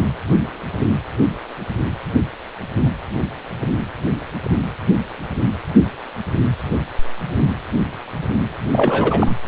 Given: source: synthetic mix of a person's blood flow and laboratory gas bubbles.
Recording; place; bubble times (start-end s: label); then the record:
Doppler ultrasound of blood flow; precordium
8.71-9.30 s: bubbles
From the record:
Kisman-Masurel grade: 212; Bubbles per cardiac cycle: several, 3 to 8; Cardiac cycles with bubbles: 1 to 10%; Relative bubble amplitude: moderate (0.250 to 0.450); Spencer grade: 1 (occasional bubble signal discernible with the cardiac motion signal, with majority of cardiac periods free of bubbles); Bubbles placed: anywhere in the cardiac cycle